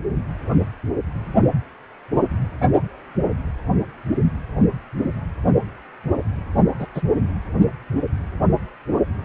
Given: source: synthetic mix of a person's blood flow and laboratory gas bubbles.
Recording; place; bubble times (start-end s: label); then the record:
Doppler ultrasound of blood flow; precordium
6.79-6.86 s: bubbles
6.94-7.02 s: bubbles
From the record:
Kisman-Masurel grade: 112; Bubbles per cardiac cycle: 1 to 2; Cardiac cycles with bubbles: 1 to 10%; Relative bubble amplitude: moderate (0.250 to 0.450); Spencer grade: 1 (occasional bubble signal discernible with the cardiac motion signal, with majority of cardiac periods free of bubbles); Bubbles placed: only in the low amplitude regions of the cardiac cycle